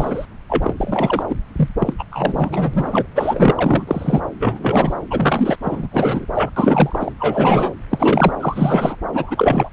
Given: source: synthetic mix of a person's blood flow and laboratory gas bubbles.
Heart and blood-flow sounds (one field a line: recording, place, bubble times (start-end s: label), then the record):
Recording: Doppler ultrasound of blood flow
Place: subclavian vein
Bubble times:
0.00-0.26 s: bubbles
0.49-0.73 s: bubbles
0.78-1.23 s: bubbles
1.30-1.35 s: bubbles
1.56-1.69 s: bubbles
1.80-1.93 s: bubbles
1.98-2.04 s: bubbles
2.12-3.06 s: bubbles
3.15-3.52 s: bubbles
3.56-4.21 s: bubbles
4.40-4.94 s: bubbles
5.10-5.55 s: bubbles
5.62-5.88 s: bubbles
5.92-6.25 s: bubbles
6.34-6.50 s: bubbles
6.56-7.12 s: bubbles
7.18-7.72 s: bubbles
7.90-8.32 s: bubbles
8.39-8.96 s: bubbles
9.13-9.69 s: bubbles
From the record:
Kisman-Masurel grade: 343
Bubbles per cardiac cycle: rolling drumbeat, 9 or more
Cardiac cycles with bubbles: 100%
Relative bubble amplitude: loud (0.450 to 0.775)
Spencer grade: 3 (all of the cardiac periods contain showers or single bubble signals, but not dominating or overriding the cardiac motion signals)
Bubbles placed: anywhere in the cardiac cycle